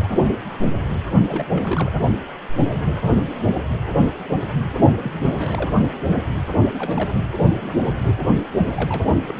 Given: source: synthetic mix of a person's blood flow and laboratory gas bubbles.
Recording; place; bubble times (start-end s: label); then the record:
Doppler ultrasound of blood flow; precordium
0.00-0.11 s: bubbles
1.28-1.44 s: bubbles
1.50-1.91 s: bubbles
5.03-5.11 s: bubbles
5.21-5.69 s: bubbles
6.78-7.16 s: bubbles
8.64-9.08 s: bubbles
9.26-9.35 s: bubbles
From the record:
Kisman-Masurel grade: 221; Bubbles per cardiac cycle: several, 3 to 8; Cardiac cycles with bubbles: 10 to 50%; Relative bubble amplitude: barely perceptible (0.100 to 0.250); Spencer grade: 2 (many but less than half of the cardiac periods contain bubble signals, singularly or in groups); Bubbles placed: only in the low amplitude regions of the cardiac cycle